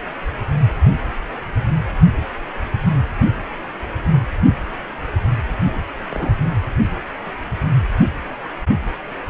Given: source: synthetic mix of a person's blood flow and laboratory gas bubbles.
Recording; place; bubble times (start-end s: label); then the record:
Doppler ultrasound of blood flow; precordium
6.10-6.41 s: bubbles
From the record:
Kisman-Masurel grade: 111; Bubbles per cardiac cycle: 1 to 2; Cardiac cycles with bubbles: 1 to 10%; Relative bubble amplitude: barely perceptible (0.100 to 0.250); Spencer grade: 1 (occasional bubble signal discernible with the cardiac motion signal, with majority of cardiac periods free of bubbles); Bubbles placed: anywhere in the cardiac cycle